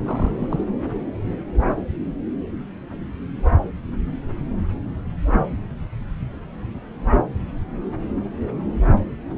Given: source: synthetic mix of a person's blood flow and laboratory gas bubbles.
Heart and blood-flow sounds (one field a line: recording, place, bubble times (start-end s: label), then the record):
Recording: Doppler ultrasound of blood flow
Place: subclavian vein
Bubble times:
0.04-0.68 s: bubbles
From the record:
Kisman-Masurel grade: 211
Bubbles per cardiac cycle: several, 3 to 8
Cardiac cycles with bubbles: 1 to 10%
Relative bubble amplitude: barely perceptible (0.100 to 0.250)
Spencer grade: 1 (occasional bubble signal discernible with the cardiac motion signal, with majority of cardiac periods free of bubbles)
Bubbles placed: anywhere in the cardiac cycle